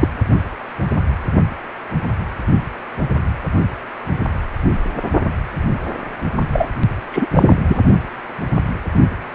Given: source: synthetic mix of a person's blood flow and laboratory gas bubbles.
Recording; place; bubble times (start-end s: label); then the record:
Doppler ultrasound of blood flow; precordium
0.00-0.08 s: bubbles
6.53-6.69 s: bubbles
7.11-7.26 s: bubbles
7.35-7.58 s: bubbles
7.67-7.79 s: bubbles
From the record:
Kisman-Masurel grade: 223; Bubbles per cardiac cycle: several, 3 to 8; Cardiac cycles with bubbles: 10 to 50%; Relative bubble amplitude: loud (0.450 to 0.775); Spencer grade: 2 (many but less than half of the cardiac periods contain bubble signals, singularly or in groups); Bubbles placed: only in the low amplitude regions of the cardiac cycle